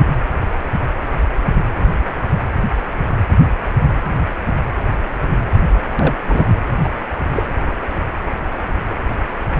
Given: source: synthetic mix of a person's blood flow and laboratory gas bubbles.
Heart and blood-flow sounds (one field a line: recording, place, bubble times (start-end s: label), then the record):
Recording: Doppler ultrasound of blood flow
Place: precordium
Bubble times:
5.97-6.15 s: bubbles
6.27-6.45 s: bubbles
6.83-6.88 s: bubbles
7.34-7.47 s: bubbles
From the record:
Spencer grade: 1 (occasional bubble signal discernible with the cardiac motion signal, with majority of cardiac periods free of bubbles)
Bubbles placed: anywhere in the cardiac cycle